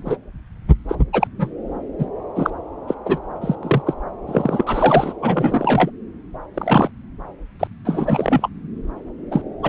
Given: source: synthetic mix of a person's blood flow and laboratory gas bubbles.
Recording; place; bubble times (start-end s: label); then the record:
Doppler ultrasound of blood flow; subclavian vein
0.05-0.17 s: bubbles
0.89-0.96 s: bubbles
1.12-1.28 s: bubbles
1.38-1.49 s: bubbles
1.99-2.06 s: bubbles
2.35-2.50 s: bubbles
2.88-2.94 s: bubbles
3.06-3.20 s: bubbles
3.42-3.56 s: bubbles
3.63-3.82 s: bubbles
3.85-3.94 s: bubbles
4.26-5.13 s: bubbles
5.22-5.91 s: bubbles
6.54-6.91 s: bubbles
7.59-7.67 s: bubbles
7.84-8.48 s: bubbles
9.31-9.42 s: bubbles
9.62-9.69 s: bubbles
From the record:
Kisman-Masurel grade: 243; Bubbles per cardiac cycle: several, 3 to 8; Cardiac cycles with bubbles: 100%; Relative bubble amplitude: loud (0.450 to 0.775); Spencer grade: 3 (all of the cardiac periods contain showers or single bubble signals, but not dominating or overriding the cardiac motion signals); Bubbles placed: anywhere in the cardiac cycle